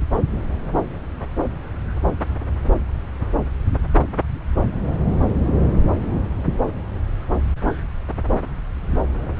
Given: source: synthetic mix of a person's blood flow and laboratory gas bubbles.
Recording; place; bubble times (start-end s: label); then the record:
Doppler ultrasound of blood flow; subclavian vein
no bubbles
From the record:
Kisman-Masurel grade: 000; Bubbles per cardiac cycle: 0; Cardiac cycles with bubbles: 0%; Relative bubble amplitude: no bubbles discernible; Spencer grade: 0 (complete lack of bubble signals)